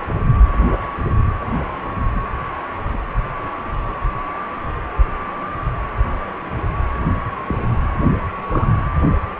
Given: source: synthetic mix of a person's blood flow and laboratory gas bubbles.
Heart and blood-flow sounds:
Doppler ultrasound of blood flow; precordium
7.48-7.54 s: bubbles
8.37-8.68 s: bubbles
From the record:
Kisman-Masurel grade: 122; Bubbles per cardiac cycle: 1 to 2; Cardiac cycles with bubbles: 10 to 50%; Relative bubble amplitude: moderate (0.250 to 0.450); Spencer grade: 2 (many but less than half of the cardiac periods contain bubble signals, singularly or in groups); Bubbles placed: only in the low amplitude regions of the cardiac cycle

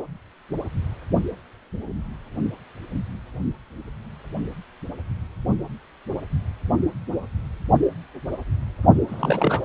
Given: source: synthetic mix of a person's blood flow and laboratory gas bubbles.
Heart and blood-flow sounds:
Doppler ultrasound of blood flow; precordium
9.07-9.62 s: bubbles
From the record:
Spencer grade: 1 (occasional bubble signal discernible with the cardiac motion signal, with majority of cardiac periods free of bubbles); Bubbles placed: only in the low amplitude regions of the cardiac cycle

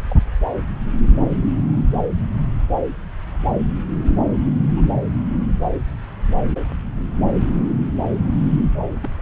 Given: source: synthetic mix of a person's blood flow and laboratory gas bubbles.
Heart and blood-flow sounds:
Doppler ultrasound of blood flow; subclavian vein
0.04-0.16 s: bubbles
1.21-1.28 s: bubbles
4.68-4.89 s: bubbles
9.03-9.10 s: bubbles
From the record:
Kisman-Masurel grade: 121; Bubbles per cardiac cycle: 1 to 2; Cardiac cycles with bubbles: 10 to 50%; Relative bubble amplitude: barely perceptible (0.100 to 0.250); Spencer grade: 2 (many but less than half of the cardiac periods contain bubble signals, singularly or in groups); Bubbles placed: anywhere in the cardiac cycle

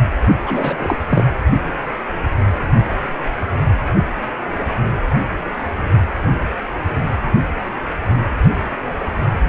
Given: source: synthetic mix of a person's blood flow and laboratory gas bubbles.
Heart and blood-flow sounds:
Doppler ultrasound of blood flow; precordium
0.43-0.97 s: bubbles
1.09-1.24 s: bubbles
From the record:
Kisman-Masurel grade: 212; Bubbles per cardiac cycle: several, 3 to 8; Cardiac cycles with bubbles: 1 to 10%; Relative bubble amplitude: moderate (0.250 to 0.450); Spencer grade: 1 (occasional bubble signal discernible with the cardiac motion signal, with majority of cardiac periods free of bubbles); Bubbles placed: only in the low amplitude regions of the cardiac cycle

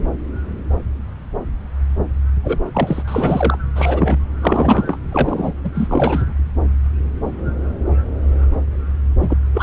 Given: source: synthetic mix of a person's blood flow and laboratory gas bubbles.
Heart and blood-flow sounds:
Doppler ultrasound of blood flow; subclavian vein
2.44-2.59 s: bubbles
2.74-3.03 s: bubbles
3.08-3.58 s: bubbles
3.75-4.17 s: bubbles
4.42-4.98 s: bubbles
5.11-5.54 s: bubbles
5.63-5.71 s: bubbles
5.75-6.23 s: bubbles
9.22-9.38 s: bubbles
9.54-9.63 s: bubbles
From the record:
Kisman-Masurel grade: 223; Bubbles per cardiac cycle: several, 3 to 8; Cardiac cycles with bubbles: 10 to 50%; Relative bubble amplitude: loud (0.450 to 0.775); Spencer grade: 2 (many but less than half of the cardiac periods contain bubble signals, singularly or in groups); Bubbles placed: anywhere in the cardiac cycle

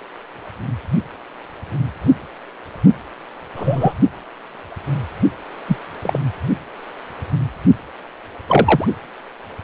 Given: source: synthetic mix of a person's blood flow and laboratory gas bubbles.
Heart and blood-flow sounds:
Doppler ultrasound of blood flow; precordium
3.56-3.94 s: bubbles
5.68-5.77 s: bubbles
6.01-6.19 s: bubbles
8.46-8.86 s: bubbles
From the record:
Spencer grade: 2 (many but less than half of the cardiac periods contain bubble signals, singularly or in groups); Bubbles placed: only in the low amplitude regions of the cardiac cycle

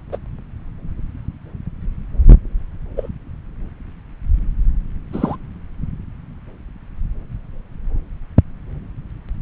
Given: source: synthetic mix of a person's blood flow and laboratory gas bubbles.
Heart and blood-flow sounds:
Doppler ultrasound of blood flow; subclavian vein
0.12-0.17 s: bubbles
2.96-3.08 s: bubbles
5.12-5.37 s: bubbles
From the record:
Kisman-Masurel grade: 122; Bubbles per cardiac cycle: 1 to 2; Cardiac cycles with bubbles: 10 to 50%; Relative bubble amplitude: moderate (0.250 to 0.450); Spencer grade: 2 (many but less than half of the cardiac periods contain bubble signals, singularly or in groups); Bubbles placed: anywhere in the cardiac cycle

